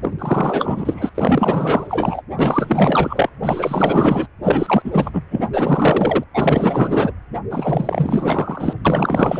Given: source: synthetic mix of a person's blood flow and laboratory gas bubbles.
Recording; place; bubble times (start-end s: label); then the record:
Doppler ultrasound of blood flow; precordium
0.02-1.12 s: bubbles
1.15-2.22 s: bubbles
2.37-3.29 s: bubbles
3.43-4.26 s: bubbles
4.43-4.82 s: bubbles
4.84-5.11 s: bubbles
5.13-5.22 s: bubbles
5.30-5.49 s: bubbles
5.53-6.24 s: bubbles
6.33-7.12 s: bubbles
7.50-8.73 s: bubbles
8.85-9.39 s: bubbles
From the record:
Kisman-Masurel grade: 444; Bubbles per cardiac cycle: continuous sound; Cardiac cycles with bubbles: 100%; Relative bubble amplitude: maximal (0.775 to 0.999); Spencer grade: 4 (maximum detectable bubble signal sounding continuously throughout systole and diastole of every cardiac period, and overriding the amplitude of the normal cardiac signals); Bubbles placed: anywhere in the cardiac cycle